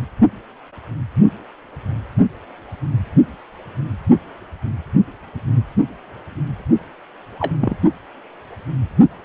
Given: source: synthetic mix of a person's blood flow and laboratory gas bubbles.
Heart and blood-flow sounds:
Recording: Doppler ultrasound of blood flow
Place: precordium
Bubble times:
7.39-7.52 s: bubbles
7.61-7.76 s: bubbles
From the record:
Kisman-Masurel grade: 112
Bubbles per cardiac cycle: 1 to 2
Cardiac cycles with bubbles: 1 to 10%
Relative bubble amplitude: moderate (0.250 to 0.450)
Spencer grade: 1 (occasional bubble signal discernible with the cardiac motion signal, with majority of cardiac periods free of bubbles)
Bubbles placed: only in the low amplitude regions of the cardiac cycle

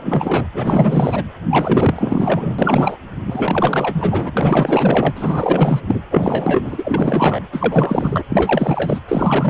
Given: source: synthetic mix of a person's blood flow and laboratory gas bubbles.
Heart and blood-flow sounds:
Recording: Doppler ultrasound of blood flow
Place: precordium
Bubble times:
0.00-0.47 s: bubbles
0.52-1.24 s: bubbles
1.50-2.97 s: bubbles
3.26-4.31 s: bubbles
4.36-5.80 s: bubbles
5.87-6.01 s: bubbles
6.11-7.40 s: bubbles
7.52-8.23 s: bubbles
8.29-9.00 s: bubbles
9.07-9.50 s: bubbles
From the record:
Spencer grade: 4 (maximum detectable bubble signal sounding continuously throughout systole and diastole of every cardiac period, and overriding the amplitude of the normal cardiac signals)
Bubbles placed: anywhere in the cardiac cycle

